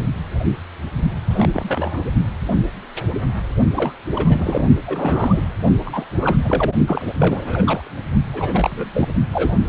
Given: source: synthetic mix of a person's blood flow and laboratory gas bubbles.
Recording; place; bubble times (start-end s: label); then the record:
Doppler ultrasound of blood flow; precordium
1.30-1.49 s: bubbles
1.53-2.03 s: bubbles
3.76-3.94 s: bubbles
4.14-4.69 s: bubbles
4.86-5.43 s: bubbles
5.85-6.06 s: bubbles
6.09-6.36 s: bubbles
6.42-6.73 s: bubbles
6.87-7.12 s: bubbles
7.19-7.91 s: bubbles
8.33-9.09 s: bubbles
9.33-9.60 s: bubbles
From the record:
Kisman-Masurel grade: 332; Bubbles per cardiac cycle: rolling drumbeat, 9 or more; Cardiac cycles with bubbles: 50 to 99%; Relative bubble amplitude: moderate (0.250 to 0.450); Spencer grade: 3 (all of the cardiac periods contain showers or single bubble signals, but not dominating or overriding the cardiac motion signals); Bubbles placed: only in the low amplitude regions of the cardiac cycle